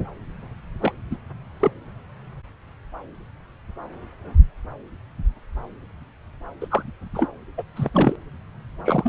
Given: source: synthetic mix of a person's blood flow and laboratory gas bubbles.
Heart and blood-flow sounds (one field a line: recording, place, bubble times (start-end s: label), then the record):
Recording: Doppler ultrasound of blood flow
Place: subclavian vein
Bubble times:
0.81-0.92 s: bubbles
1.10-1.16 s: bubbles
1.60-1.71 s: bubbles
6.61-6.67 s: bubbles
6.71-6.83 s: bubbles
7.14-7.27 s: bubbles
7.57-7.63 s: bubbles
7.75-7.89 s: bubbles
7.93-8.15 s: bubbles
8.85-9.09 s: bubbles
From the record:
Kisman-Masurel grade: 222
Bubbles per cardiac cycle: several, 3 to 8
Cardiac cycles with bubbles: 10 to 50%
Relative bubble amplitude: moderate (0.250 to 0.450)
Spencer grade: 2 (many but less than half of the cardiac periods contain bubble signals, singularly or in groups)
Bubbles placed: anywhere in the cardiac cycle